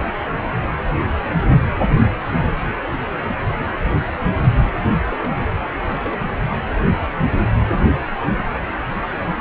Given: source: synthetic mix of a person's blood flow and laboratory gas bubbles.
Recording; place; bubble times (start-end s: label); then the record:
Doppler ultrasound of blood flow; precordium
5.11-5.32 s: bubbles
5.69-5.74 s: bubbles
5.88-6.29 s: bubbles
From the record:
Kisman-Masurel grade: 211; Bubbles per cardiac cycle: several, 3 to 8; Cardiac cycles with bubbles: 1 to 10%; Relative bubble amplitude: barely perceptible (0.100 to 0.250); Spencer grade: 1 (occasional bubble signal discernible with the cardiac motion signal, with majority of cardiac periods free of bubbles); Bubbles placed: anywhere in the cardiac cycle